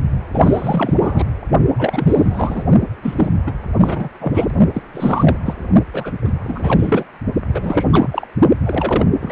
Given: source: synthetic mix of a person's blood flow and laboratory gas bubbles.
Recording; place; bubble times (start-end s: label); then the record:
Doppler ultrasound of blood flow; precordium
0.32-1.24 s: bubbles
1.79-2.62 s: bubbles
3.02-3.29 s: bubbles
3.46-3.52 s: bubbles
3.80-4.09 s: bubbles
4.21-4.46 s: bubbles
4.73-4.83 s: bubbles
4.94-5.37 s: bubbles
5.46-5.54 s: bubbles
5.93-6.11 s: bubbles
6.24-6.32 s: bubbles
6.43-7.04 s: bubbles
7.53-7.84 s: bubbles
7.92-8.27 s: bubbles
8.63-9.05 s: bubbles
9.21-9.32 s: bubbles
From the record:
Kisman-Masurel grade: 343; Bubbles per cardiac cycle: rolling drumbeat, 9 or more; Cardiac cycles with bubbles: 100%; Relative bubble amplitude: loud (0.450 to 0.775); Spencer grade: 3 (all of the cardiac periods contain showers or single bubble signals, but not dominating or overriding the cardiac motion signals); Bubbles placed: only in the low amplitude regions of the cardiac cycle